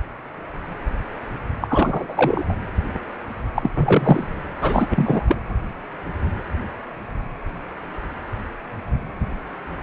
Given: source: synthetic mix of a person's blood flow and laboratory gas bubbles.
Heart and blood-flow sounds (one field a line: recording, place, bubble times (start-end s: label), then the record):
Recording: Doppler ultrasound of blood flow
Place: precordium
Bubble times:
1.60-2.54 s: bubbles
3.55-4.28 s: bubbles
4.55-4.88 s: bubbles
4.95-5.25 s: bubbles
5.28-5.38 s: bubbles
From the record:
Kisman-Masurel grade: 223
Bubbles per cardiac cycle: several, 3 to 8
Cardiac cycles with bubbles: 10 to 50%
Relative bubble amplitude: loud (0.450 to 0.775)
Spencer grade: 2 (many but less than half of the cardiac periods contain bubble signals, singularly or in groups)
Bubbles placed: anywhere in the cardiac cycle